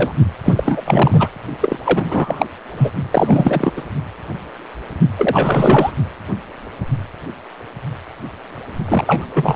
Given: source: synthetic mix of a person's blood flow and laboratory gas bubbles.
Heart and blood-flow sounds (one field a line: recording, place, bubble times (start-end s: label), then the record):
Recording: Doppler ultrasound of blood flow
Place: precordium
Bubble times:
0.00-0.13 s: bubbles
0.45-0.82 s: bubbles
0.84-1.29 s: bubbles
1.60-1.78 s: bubbles
1.84-2.47 s: bubbles
2.77-2.90 s: bubbles
3.11-3.72 s: bubbles
3.76-3.81 s: bubbles
5.17-5.92 s: bubbles
8.88-9.25 s: bubbles
9.35-9.56 s: bubbles
From the record:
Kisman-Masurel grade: 333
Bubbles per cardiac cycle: rolling drumbeat, 9 or more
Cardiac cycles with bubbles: 50 to 99%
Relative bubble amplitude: loud (0.450 to 0.775)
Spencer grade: 3 (all of the cardiac periods contain showers or single bubble signals, but not dominating or overriding the cardiac motion signals)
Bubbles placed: only in the low amplitude regions of the cardiac cycle